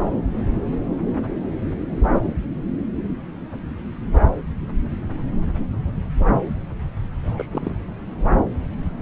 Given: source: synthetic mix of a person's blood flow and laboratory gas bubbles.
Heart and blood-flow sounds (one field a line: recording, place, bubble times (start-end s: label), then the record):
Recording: Doppler ultrasound of blood flow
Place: subclavian vein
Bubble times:
7.23-7.46 s: bubbles
7.51-7.75 s: bubbles
From the record:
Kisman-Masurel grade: 211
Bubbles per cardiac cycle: several, 3 to 8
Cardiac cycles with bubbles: 1 to 10%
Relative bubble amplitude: barely perceptible (0.100 to 0.250)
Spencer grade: 1 (occasional bubble signal discernible with the cardiac motion signal, with majority of cardiac periods free of bubbles)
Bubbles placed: anywhere in the cardiac cycle